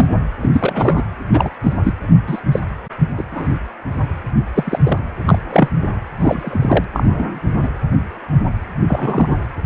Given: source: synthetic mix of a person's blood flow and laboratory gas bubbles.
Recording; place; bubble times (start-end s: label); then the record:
Doppler ultrasound of blood flow; precordium
0.00-0.24 s: bubbles
0.42-0.50 s: bubbles
0.53-1.04 s: bubbles
1.32-1.49 s: bubbles
1.63-1.72 s: bubbles
1.84-1.94 s: bubbles
2.27-2.41 s: bubbles
2.52-2.60 s: bubbles
3.17-3.24 s: bubbles
3.32-3.48 s: bubbles
4.54-4.79 s: bubbles
4.85-4.98 s: bubbles
5.25-5.38 s: bubbles
5.50-5.68 s: bubbles
6.20-6.84 s: bubbles
6.93-7.41 s: bubbles
7.62-7.69 s: bubbles
8.88-9.46 s: bubbles
From the record:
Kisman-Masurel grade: 233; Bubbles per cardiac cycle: several, 3 to 8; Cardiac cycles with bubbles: 50 to 99%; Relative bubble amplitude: loud (0.450 to 0.775); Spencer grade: 3 (all of the cardiac periods contain showers or single bubble signals, but not dominating or overriding the cardiac motion signals); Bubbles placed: anywhere in the cardiac cycle